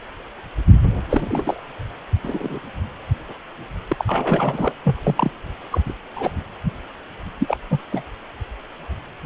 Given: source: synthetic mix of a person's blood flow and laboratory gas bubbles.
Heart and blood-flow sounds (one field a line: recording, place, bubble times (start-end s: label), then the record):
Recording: Doppler ultrasound of blood flow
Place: precordium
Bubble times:
1.10-1.59 s: bubbles
2.24-2.59 s: bubbles
3.90-4.74 s: bubbles
4.84-4.99 s: bubbles
5.03-5.31 s: bubbles
5.71-5.81 s: bubbles
5.86-5.94 s: bubbles
6.16-6.31 s: bubbles
7.40-7.58 s: bubbles
7.71-7.82 s: bubbles
7.92-8.04 s: bubbles
From the record:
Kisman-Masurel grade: 232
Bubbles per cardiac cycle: several, 3 to 8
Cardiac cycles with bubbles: 50 to 99%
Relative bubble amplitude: moderate (0.250 to 0.450)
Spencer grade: 3 (all of the cardiac periods contain showers or single bubble signals, but not dominating or overriding the cardiac motion signals)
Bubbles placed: anywhere in the cardiac cycle